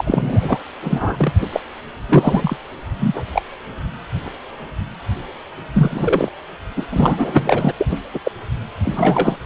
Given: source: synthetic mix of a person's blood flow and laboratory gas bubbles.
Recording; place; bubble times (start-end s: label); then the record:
Doppler ultrasound of blood flow; precordium
0.00-0.58 s: bubbles
0.81-1.32 s: bubbles
1.40-1.47 s: bubbles
1.52-1.60 s: bubbles
2.08-2.56 s: bubbles
2.98-3.23 s: bubbles
3.33-3.42 s: bubbles
5.73-6.29 s: bubbles
6.77-6.86 s: bubbles
6.91-7.71 s: bubbles
7.78-7.98 s: bubbles
8.13-8.19 s: bubbles
8.24-8.31 s: bubbles
8.83-9.37 s: bubbles
From the record:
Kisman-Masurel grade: 233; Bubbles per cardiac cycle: several, 3 to 8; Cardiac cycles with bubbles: 50 to 99%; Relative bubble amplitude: loud (0.450 to 0.775); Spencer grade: 3 (all of the cardiac periods contain showers or single bubble signals, but not dominating or overriding the cardiac motion signals); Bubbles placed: anywhere in the cardiac cycle